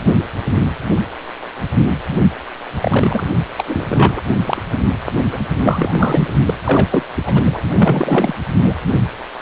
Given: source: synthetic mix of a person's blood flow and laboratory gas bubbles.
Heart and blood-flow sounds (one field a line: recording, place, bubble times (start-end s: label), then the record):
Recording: Doppler ultrasound of blood flow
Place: precordium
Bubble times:
2.71-3.27 s: bubbles
3.57-3.64 s: bubbles
3.67-4.21 s: bubbles
4.45-4.62 s: bubbles
5.33-5.40 s: bubbles
5.56-5.96 s: bubbles
5.98-6.29 s: bubbles
6.46-6.54 s: bubbles
6.66-7.04 s: bubbles
7.16-7.62 s: bubbles
7.68-8.35 s: bubbles
8.63-8.74 s: bubbles
From the record:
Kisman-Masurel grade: 333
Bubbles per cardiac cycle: rolling drumbeat, 9 or more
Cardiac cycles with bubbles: 50 to 99%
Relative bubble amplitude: loud (0.450 to 0.775)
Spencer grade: 3 (all of the cardiac periods contain showers or single bubble signals, but not dominating or overriding the cardiac motion signals)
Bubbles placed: anywhere in the cardiac cycle